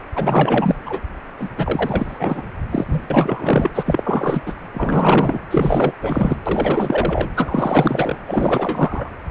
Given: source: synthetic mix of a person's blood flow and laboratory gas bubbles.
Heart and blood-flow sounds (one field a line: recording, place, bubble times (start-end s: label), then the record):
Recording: Doppler ultrasound of blood flow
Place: precordium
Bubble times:
0.15-0.76 s: bubbles
0.85-1.00 s: bubbles
1.38-1.49 s: bubbles
1.57-2.17 s: bubbles
2.20-2.47 s: bubbles
2.71-2.99 s: bubbles
3.10-3.71 s: bubbles
3.75-4.42 s: bubbles
4.46-4.54 s: bubbles
4.73-5.40 s: bubbles
5.50-5.92 s: bubbles
6.02-6.36 s: bubbles
6.46-7.29 s: bubbles
7.36-8.18 s: bubbles
8.28-9.12 s: bubbles
9.24-9.31 s: bubbles
From the record:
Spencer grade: 4 (maximum detectable bubble signal sounding continuously throughout systole and diastole of every cardiac period, and overriding the amplitude of the normal cardiac signals)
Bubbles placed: anywhere in the cardiac cycle